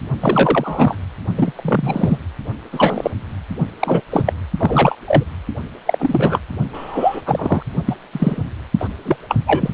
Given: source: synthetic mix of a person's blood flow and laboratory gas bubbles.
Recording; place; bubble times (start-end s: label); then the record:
Doppler ultrasound of blood flow; precordium
0.20-0.97 s: bubbles
1.35-1.52 s: bubbles
1.56-2.18 s: bubbles
2.72-3.10 s: bubbles
3.79-4.01 s: bubbles
4.10-4.33 s: bubbles
4.58-4.96 s: bubbles
5.06-5.24 s: bubbles
5.85-6.39 s: bubbles
6.72-7.21 s: bubbles
7.26-7.62 s: bubbles
7.86-7.96 s: bubbles
8.12-8.45 s: bubbles
8.79-8.88 s: bubbles
9.05-9.17 s: bubbles
9.28-9.36 s: bubbles
9.47-9.70 s: bubbles
From the record:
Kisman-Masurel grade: 243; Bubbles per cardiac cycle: several, 3 to 8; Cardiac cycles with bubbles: 100%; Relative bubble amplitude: loud (0.450 to 0.775); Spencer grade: 3 (all of the cardiac periods contain showers or single bubble signals, but not dominating or overriding the cardiac motion signals); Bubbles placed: only in the low amplitude regions of the cardiac cycle